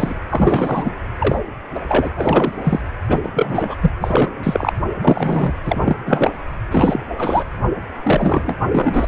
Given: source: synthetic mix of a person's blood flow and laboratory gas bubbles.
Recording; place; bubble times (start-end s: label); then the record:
Doppler ultrasound of blood flow; precordium
0.00-0.14 s: bubbles
0.30-0.92 s: bubbles
1.19-1.38 s: bubbles
1.74-1.80 s: bubbles
1.89-2.09 s: bubbles
2.17-2.88 s: bubbles
3.08-3.19 s: bubbles
3.23-3.29 s: bubbles
3.35-3.75 s: bubbles
3.81-3.91 s: bubbles
4.01-4.29 s: bubbles
4.43-4.71 s: bubbles
5.01-5.52 s: bubbles
5.65-5.96 s: bubbles
6.06-6.31 s: bubbles
6.71-7.01 s: bubbles
7.17-7.43 s: bubbles
8.03-8.55 s: bubbles
8.71-9.05 s: bubbles
From the record:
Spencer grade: 3 (all of the cardiac periods contain showers or single bubble signals, but not dominating or overriding the cardiac motion signals); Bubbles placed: anywhere in the cardiac cycle